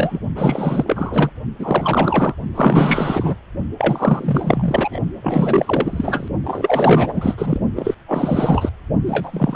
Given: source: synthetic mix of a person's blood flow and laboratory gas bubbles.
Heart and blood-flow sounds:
Doppler ultrasound of blood flow; precordium
0.00-0.19 s: bubbles
0.35-1.30 s: bubbles
1.58-2.35 s: bubbles
2.54-3.35 s: bubbles
3.78-5.00 s: bubbles
5.23-6.28 s: bubbles
6.44-7.35 s: bubbles
7.38-7.60 s: bubbles
7.75-7.95 s: bubbles
8.08-8.70 s: bubbles
9.06-9.56 s: bubbles
From the record:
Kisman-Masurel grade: 444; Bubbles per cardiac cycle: continuous sound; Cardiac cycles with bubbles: 100%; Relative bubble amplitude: maximal (0.775 to 0.999); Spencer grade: 4 (maximum detectable bubble signal sounding continuously throughout systole and diastole of every cardiac period, and overriding the amplitude of the normal cardiac signals); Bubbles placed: only in the low amplitude regions of the cardiac cycle

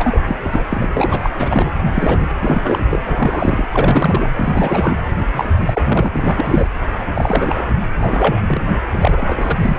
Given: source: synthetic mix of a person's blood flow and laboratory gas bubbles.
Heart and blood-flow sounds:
Doppler ultrasound of blood flow; precordium
0.00-0.18 s: bubbles
0.25-0.36 s: bubbles
0.43-0.86 s: bubbles
0.94-1.30 s: bubbles
1.34-1.71 s: bubbles
1.79-2.27 s: bubbles
2.40-2.83 s: bubbles
2.90-3.03 s: bubbles
3.06-3.68 s: bubbles
3.71-4.29 s: bubbles
4.33-4.96 s: bubbles
5.34-5.53 s: bubbles
5.66-6.08 s: bubbles
6.13-6.68 s: bubbles
7.15-7.75 s: bubbles
7.80-7.87 s: bubbles
8.01-8.39 s: bubbles
8.48-8.62 s: bubbles
8.88-9.78 s: bubbles
From the record:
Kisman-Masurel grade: 342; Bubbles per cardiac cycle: rolling drumbeat, 9 or more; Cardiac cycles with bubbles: 100%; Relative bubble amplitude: moderate (0.250 to 0.450); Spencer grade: 3 (all of the cardiac periods contain showers or single bubble signals, but not dominating or overriding the cardiac motion signals); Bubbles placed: anywhere in the cardiac cycle

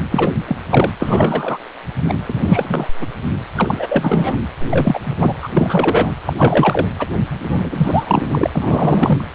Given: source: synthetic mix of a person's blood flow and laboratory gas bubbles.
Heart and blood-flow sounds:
Doppler ultrasound of blood flow; precordium
0.11-0.32 s: bubbles
0.45-0.56 s: bubbles
0.70-0.92 s: bubbles
0.99-1.57 s: bubbles
2.08-2.14 s: bubbles
2.25-2.88 s: bubbles
2.99-3.06 s: bubbles
3.55-4.38 s: bubbles
4.62-5.00 s: bubbles
5.03-5.14 s: bubbles
5.17-5.34 s: bubbles
5.42-6.12 s: bubbles
6.25-6.33 s: bubbles
6.38-6.88 s: bubbles
6.98-7.08 s: bubbles
7.39-8.46 s: bubbles
8.53-9.25 s: bubbles
From the record:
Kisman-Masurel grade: 333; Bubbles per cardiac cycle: rolling drumbeat, 9 or more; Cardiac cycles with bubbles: 50 to 99%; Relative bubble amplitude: loud (0.450 to 0.775); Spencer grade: 3 (all of the cardiac periods contain showers or single bubble signals, but not dominating or overriding the cardiac motion signals); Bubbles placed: anywhere in the cardiac cycle

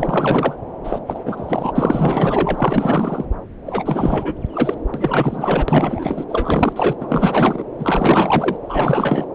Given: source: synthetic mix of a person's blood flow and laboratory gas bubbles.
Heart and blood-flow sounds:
Doppler ultrasound of blood flow; subclavian vein
0.00-0.56 s: bubbles
0.83-1.00 s: bubbles
1.06-1.73 s: bubbles
1.75-3.25 s: bubbles
3.66-4.35 s: bubbles
4.53-4.75 s: bubbles
4.94-6.25 s: bubbles
6.29-6.72 s: bubbles
6.76-6.96 s: bubbles
7.00-7.63 s: bubbles
7.79-8.56 s: bubbles
8.62-9.25 s: bubbles
From the record:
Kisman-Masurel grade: 444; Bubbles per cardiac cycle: continuous sound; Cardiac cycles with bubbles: 100%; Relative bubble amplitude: maximal (0.775 to 0.999); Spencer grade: 4 (maximum detectable bubble signal sounding continuously throughout systole and diastole of every cardiac period, and overriding the amplitude of the normal cardiac signals); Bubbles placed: anywhere in the cardiac cycle

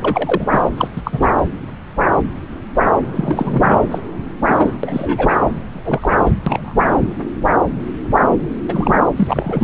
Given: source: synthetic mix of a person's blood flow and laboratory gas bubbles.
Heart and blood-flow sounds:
Doppler ultrasound of blood flow; subclavian vein
0.01-0.47 s: bubbles
0.51-0.62 s: bubbles
0.77-0.88 s: bubbles
0.95-1.01 s: bubbles
1.04-1.27 s: bubbles
1.38-1.43 s: bubbles
3.14-3.79 s: bubbles
3.91-3.99 s: bubbles
4.46-4.73 s: bubbles
4.83-5.37 s: bubbles
5.71-6.18 s: bubbles
6.24-6.32 s: bubbles
6.46-6.75 s: bubbles
8.68-9.00 s: bubbles
9.16-9.64 s: bubbles
From the record:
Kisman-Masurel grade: 233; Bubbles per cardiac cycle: several, 3 to 8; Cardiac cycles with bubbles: 50 to 99%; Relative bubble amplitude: loud (0.450 to 0.775); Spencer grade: 3 (all of the cardiac periods contain showers or single bubble signals, but not dominating or overriding the cardiac motion signals); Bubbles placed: anywhere in the cardiac cycle

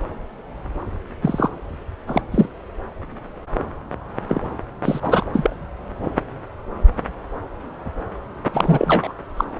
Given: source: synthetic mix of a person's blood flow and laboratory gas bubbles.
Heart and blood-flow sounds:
Doppler ultrasound of blood flow; subclavian vein
1.22-1.49 s: bubbles
2.07-2.22 s: bubbles
2.31-2.47 s: bubbles
4.28-4.41 s: bubbles
4.84-5.25 s: bubbles
5.33-5.56 s: bubbles
8.52-9.12 s: bubbles
9.37-9.45 s: bubbles
From the record:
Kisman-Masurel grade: 233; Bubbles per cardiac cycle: several, 3 to 8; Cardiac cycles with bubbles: 50 to 99%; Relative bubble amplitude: loud (0.450 to 0.775); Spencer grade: 3 (all of the cardiac periods contain showers or single bubble signals, but not dominating or overriding the cardiac motion signals); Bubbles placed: anywhere in the cardiac cycle

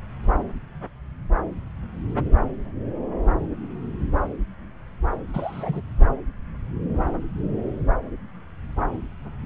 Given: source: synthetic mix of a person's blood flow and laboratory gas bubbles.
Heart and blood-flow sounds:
Doppler ultrasound of blood flow; subclavian vein
5.33-5.81 s: bubbles
From the record:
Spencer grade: 1 (occasional bubble signal discernible with the cardiac motion signal, with majority of cardiac periods free of bubbles); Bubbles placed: anywhere in the cardiac cycle

